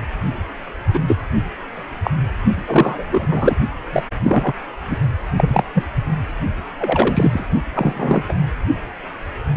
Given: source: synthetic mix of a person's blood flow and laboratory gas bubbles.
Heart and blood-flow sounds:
Doppler ultrasound of blood flow; precordium
0.94-1.00 s: bubbles
1.07-1.17 s: bubbles
2.04-2.11 s: bubbles
2.54-3.05 s: bubbles
3.12-3.54 s: bubbles
3.92-4.06 s: bubbles
4.24-4.53 s: bubbles
4.89-4.96 s: bubbles
5.36-5.64 s: bubbles
5.74-5.83 s: bubbles
6.77-7.46 s: bubbles
7.74-8.23 s: bubbles
8.29-8.34 s: bubbles
From the record:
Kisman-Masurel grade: 233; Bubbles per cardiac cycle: several, 3 to 8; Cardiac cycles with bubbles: 50 to 99%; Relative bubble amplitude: loud (0.450 to 0.775); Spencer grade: 3 (all of the cardiac periods contain showers or single bubble signals, but not dominating or overriding the cardiac motion signals); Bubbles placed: only in the low amplitude regions of the cardiac cycle

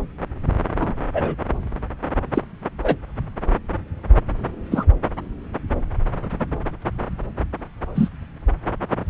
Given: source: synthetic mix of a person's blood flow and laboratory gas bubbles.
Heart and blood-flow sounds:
Doppler ultrasound of blood flow; subclavian vein
0.80-0.95 s: bubbles
1.14-1.35 s: bubbles
2.33-2.42 s: bubbles
2.83-2.97 s: bubbles
4.71-4.85 s: bubbles
7.95-8.10 s: bubbles
From the record:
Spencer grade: 2 (many but less than half of the cardiac periods contain bubble signals, singularly or in groups); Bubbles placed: anywhere in the cardiac cycle

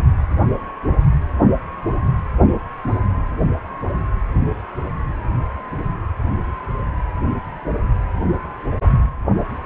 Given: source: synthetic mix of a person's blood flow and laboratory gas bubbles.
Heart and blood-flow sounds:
Doppler ultrasound of blood flow; precordium
no bubbles
From the record:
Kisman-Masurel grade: 000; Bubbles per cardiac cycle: 0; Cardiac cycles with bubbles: 0%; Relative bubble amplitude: no bubbles discernible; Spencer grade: 0 (complete lack of bubble signals)

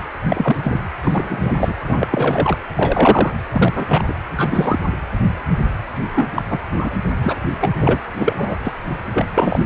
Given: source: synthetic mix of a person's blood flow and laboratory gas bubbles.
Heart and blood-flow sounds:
Doppler ultrasound of blood flow; precordium
0.22-0.81 s: bubbles
1.04-1.74 s: bubbles
1.87-2.58 s: bubbles
2.75-3.35 s: bubbles
3.52-4.03 s: bubbles
4.07-4.13 s: bubbles
4.36-4.79 s: bubbles
6.09-6.27 s: bubbles
6.35-6.42 s: bubbles
6.50-6.59 s: bubbles
6.78-6.94 s: bubbles
7.21-7.36 s: bubbles
7.60-7.73 s: bubbles
7.79-8.01 s: bubbles
8.18-8.34 s: bubbles
8.37-8.58 s: bubbles
8.64-8.74 s: bubbles
9.13-9.26 s: bubbles
9.35-9.59 s: bubbles
From the record:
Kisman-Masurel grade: 243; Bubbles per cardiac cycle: several, 3 to 8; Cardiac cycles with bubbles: 100%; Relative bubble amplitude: loud (0.450 to 0.775); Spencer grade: 3 (all of the cardiac periods contain showers or single bubble signals, but not dominating or overriding the cardiac motion signals); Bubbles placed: anywhere in the cardiac cycle

